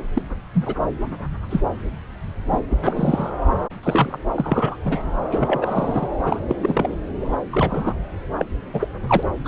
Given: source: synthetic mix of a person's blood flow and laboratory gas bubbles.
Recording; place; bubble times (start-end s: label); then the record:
Doppler ultrasound of blood flow; subclavian vein
0.14-0.22 s: bubbles
0.53-0.74 s: bubbles
1.50-1.61 s: bubbles
2.52-2.60 s: bubbles
2.70-2.76 s: bubbles
2.83-3.30 s: bubbles
3.83-4.18 s: bubbles
4.34-4.76 s: bubbles
4.85-5.11 s: bubbles
5.31-6.08 s: bubbles
6.22-6.40 s: bubbles
6.48-6.55 s: bubbles
6.62-6.97 s: bubbles
7.20-7.94 s: bubbles
8.38-8.46 s: bubbles
8.73-8.88 s: bubbles
9.07-9.23 s: bubbles
9.45-9.48 s: bubbles
From the record:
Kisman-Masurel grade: 242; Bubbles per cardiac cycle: several, 3 to 8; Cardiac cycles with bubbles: 100%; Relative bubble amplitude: moderate (0.250 to 0.450); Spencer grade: 3 (all of the cardiac periods contain showers or single bubble signals, but not dominating or overriding the cardiac motion signals); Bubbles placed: anywhere in the cardiac cycle